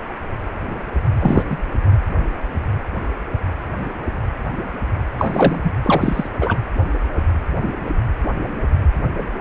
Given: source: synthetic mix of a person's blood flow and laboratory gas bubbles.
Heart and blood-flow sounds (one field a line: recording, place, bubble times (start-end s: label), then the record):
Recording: Doppler ultrasound of blood flow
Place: precordium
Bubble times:
1.19-1.44 s: bubbles
1.50-1.58 s: bubbles
5.18-5.61 s: bubbles
5.63-5.71 s: bubbles
5.83-6.29 s: bubbles
6.41-6.58 s: bubbles
From the record:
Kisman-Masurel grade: 223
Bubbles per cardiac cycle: several, 3 to 8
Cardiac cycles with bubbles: 10 to 50%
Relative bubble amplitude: loud (0.450 to 0.775)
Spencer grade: 2 (many but less than half of the cardiac periods contain bubble signals, singularly or in groups)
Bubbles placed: anywhere in the cardiac cycle